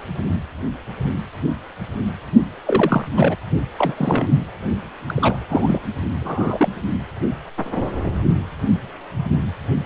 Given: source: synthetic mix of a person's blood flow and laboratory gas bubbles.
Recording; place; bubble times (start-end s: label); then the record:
Doppler ultrasound of blood flow; precordium
2.67-3.08 s: bubbles
3.16-3.36 s: bubbles
3.78-4.28 s: bubbles
5.07-5.80 s: bubbles
6.21-6.68 s: bubbles
From the record:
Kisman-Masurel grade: 222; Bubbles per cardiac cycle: several, 3 to 8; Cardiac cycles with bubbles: 10 to 50%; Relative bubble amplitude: moderate (0.250 to 0.450); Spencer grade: 2 (many but less than half of the cardiac periods contain bubble signals, singularly or in groups); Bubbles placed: anywhere in the cardiac cycle